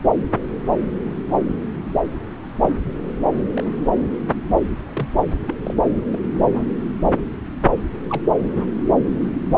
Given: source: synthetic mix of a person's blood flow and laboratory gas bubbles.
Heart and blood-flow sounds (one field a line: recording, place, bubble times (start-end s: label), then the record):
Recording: Doppler ultrasound of blood flow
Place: subclavian vein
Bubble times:
2.61-2.75 s: bubbles
3.57-3.72 s: bubbles
4.88-5.07 s: bubbles
5.47-5.55 s: bubbles
5.63-5.75 s: bubbles
6.13-6.18 s: bubbles
6.54-6.66 s: bubbles
8.08-8.21 s: bubbles
From the record:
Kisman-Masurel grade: 121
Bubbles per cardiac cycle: 1 to 2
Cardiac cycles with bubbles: 10 to 50%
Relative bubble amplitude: barely perceptible (0.100 to 0.250)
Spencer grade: 2 (many but less than half of the cardiac periods contain bubble signals, singularly or in groups)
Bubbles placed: anywhere in the cardiac cycle